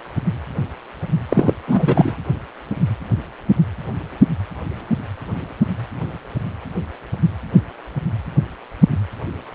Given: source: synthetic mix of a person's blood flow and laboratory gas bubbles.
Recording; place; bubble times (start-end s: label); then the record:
Doppler ultrasound of blood flow; precordium
1.29-1.54 s: bubbles
1.67-2.15 s: bubbles
From the record:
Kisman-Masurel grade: 213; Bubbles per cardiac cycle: several, 3 to 8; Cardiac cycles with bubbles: 1 to 10%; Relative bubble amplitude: loud (0.450 to 0.775); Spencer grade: 1 (occasional bubble signal discernible with the cardiac motion signal, with majority of cardiac periods free of bubbles); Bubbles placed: anywhere in the cardiac cycle